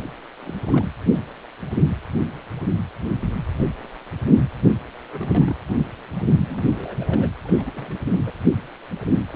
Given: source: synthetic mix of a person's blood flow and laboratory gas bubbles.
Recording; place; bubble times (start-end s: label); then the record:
Doppler ultrasound of blood flow; precordium
0.01-0.09 s: bubbles
0.41-0.59 s: bubbles
0.66-0.85 s: bubbles
4.63-4.71 s: bubbles
5.12-5.55 s: bubbles
6.47-7.30 s: bubbles
7.44-7.52 s: bubbles
7.56-7.63 s: bubbles
7.65-7.71 s: bubbles
7.74-7.99 s: bubbles
8.06-8.11 s: bubbles
8.26-8.31 s: bubbles
9.30-9.36 s: bubbles
From the record:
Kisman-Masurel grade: 221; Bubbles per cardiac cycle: several, 3 to 8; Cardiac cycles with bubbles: 10 to 50%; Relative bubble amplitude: barely perceptible (0.100 to 0.250); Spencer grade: 2 (many but less than half of the cardiac periods contain bubble signals, singularly or in groups); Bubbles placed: anywhere in the cardiac cycle